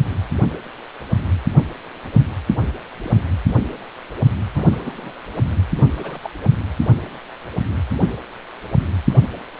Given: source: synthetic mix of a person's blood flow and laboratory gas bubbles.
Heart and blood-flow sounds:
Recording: Doppler ultrasound of blood flow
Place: precordium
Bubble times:
2.04-2.08 s: bubbles
3.02-3.21 s: bubbles
4.54-5.22 s: bubbles
5.97-6.19 s: bubbles
6.23-6.30 s: bubbles
From the record:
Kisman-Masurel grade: 121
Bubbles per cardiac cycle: 1 to 2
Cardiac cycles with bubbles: 10 to 50%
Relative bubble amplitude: barely perceptible (0.100 to 0.250)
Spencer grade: 2 (many but less than half of the cardiac periods contain bubble signals, singularly or in groups)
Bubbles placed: anywhere in the cardiac cycle

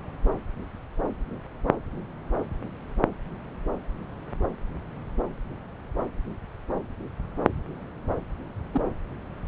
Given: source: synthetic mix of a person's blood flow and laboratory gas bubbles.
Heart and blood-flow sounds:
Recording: Doppler ultrasound of blood flow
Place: subclavian vein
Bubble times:
8.71-8.81 s: bubbles
From the record:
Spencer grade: 1 (occasional bubble signal discernible with the cardiac motion signal, with majority of cardiac periods free of bubbles)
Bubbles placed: anywhere in the cardiac cycle

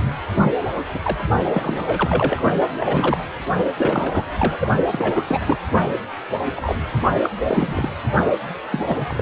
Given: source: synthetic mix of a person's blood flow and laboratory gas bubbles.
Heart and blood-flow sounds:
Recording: Doppler ultrasound of blood flow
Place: precordium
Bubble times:
0.34-0.54 s: bubbles
0.93-0.98 s: bubbles
1.04-1.17 s: bubbles
1.46-2.42 s: bubbles
2.80-3.24 s: bubbles
3.77-4.24 s: bubbles
4.38-4.68 s: bubbles
4.91-5.24 s: bubbles
5.27-5.41 s: bubbles
5.46-5.57 s: bubbles
6.56-6.79 s: bubbles
7.23-7.29 s: bubbles
7.40-7.89 s: bubbles
8.71-9.22 s: bubbles
From the record:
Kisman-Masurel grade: 242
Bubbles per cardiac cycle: several, 3 to 8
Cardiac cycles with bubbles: 100%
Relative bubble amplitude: moderate (0.250 to 0.450)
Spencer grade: 3 (all of the cardiac periods contain showers or single bubble signals, but not dominating or overriding the cardiac motion signals)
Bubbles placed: only in the low amplitude regions of the cardiac cycle

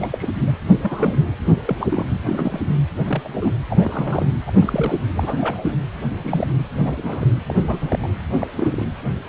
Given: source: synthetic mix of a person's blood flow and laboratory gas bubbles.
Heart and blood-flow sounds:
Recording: Doppler ultrasound of blood flow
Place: precordium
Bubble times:
0.00-0.08 s: bubbles
0.11-0.33 s: bubbles
0.36-0.52 s: bubbles
0.81-1.16 s: bubbles
1.54-1.86 s: bubbles
1.91-2.07 s: bubbles
2.26-2.61 s: bubbles
2.66-2.74 s: bubbles
3.05-3.29 s: bubbles
3.33-3.51 s: bubbles
3.70-3.77 s: bubbles
3.79-4.29 s: bubbles
4.46-4.50 s: bubbles
4.59-4.96 s: bubbles
5.16-5.78 s: bubbles
6.23-6.48 s: bubbles
6.80-7.26 s: bubbles
7.48-7.55 s: bubbles
7.59-8.09 s: bubbles
8.40-8.47 s: bubbles
8.57-8.85 s: bubbles
From the record:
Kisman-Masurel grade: 232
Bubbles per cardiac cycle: several, 3 to 8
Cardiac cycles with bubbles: 50 to 99%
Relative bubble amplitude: moderate (0.250 to 0.450)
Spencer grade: 3 (all of the cardiac periods contain showers or single bubble signals, but not dominating or overriding the cardiac motion signals)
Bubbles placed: anywhere in the cardiac cycle

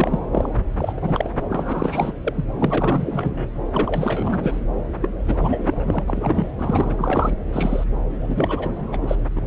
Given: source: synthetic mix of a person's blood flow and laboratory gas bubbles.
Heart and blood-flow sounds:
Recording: Doppler ultrasound of blood flow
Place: subclavian vein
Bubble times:
0.00-0.19 s: bubbles
0.32-0.49 s: bubbles
0.78-0.93 s: bubbles
0.96-1.30 s: bubbles
1.49-2.14 s: bubbles
2.24-2.45 s: bubbles
2.58-3.51 s: bubbles
3.73-4.61 s: bubbles
5.02-5.12 s: bubbles
5.26-5.84 s: bubbles
5.87-6.04 s: bubbles
6.08-6.51 s: bubbles
6.58-7.35 s: bubbles
7.53-7.84 s: bubbles
8.20-9.15 s: bubbles
9.36-9.42 s: bubbles
From the record:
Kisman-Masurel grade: 342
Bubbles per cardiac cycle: rolling drumbeat, 9 or more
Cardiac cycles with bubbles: 100%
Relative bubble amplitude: moderate (0.250 to 0.450)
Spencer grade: 3 (all of the cardiac periods contain showers or single bubble signals, but not dominating or overriding the cardiac motion signals)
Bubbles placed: anywhere in the cardiac cycle

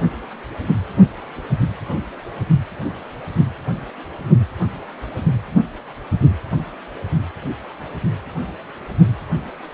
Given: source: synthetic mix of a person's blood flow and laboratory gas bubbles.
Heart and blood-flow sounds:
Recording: Doppler ultrasound of blood flow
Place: precordium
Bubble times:
no bubbles
From the record:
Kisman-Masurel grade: 000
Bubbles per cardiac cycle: 0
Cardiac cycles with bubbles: 0%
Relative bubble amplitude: no bubbles discernible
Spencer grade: 0 (complete lack of bubble signals)

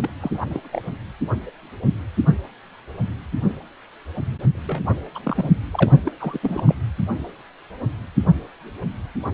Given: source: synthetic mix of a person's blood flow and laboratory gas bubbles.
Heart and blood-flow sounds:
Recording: Doppler ultrasound of blood flow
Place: precordium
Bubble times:
0.02-0.09 s: bubbles
0.20-0.30 s: bubbles
0.33-0.46 s: bubbles
0.49-0.60 s: bubbles
0.72-0.81 s: bubbles
4.55-4.82 s: bubbles
5.14-5.18 s: bubbles
5.23-5.49 s: bubbles
5.71-5.92 s: bubbles
6.05-6.12 s: bubbles
6.20-6.39 s: bubbles
6.42-6.75 s: bubbles
From the record:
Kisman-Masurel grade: 222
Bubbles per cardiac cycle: several, 3 to 8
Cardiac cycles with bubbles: 10 to 50%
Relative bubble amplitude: moderate (0.250 to 0.450)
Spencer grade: 2 (many but less than half of the cardiac periods contain bubble signals, singularly or in groups)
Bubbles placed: only in the low amplitude regions of the cardiac cycle

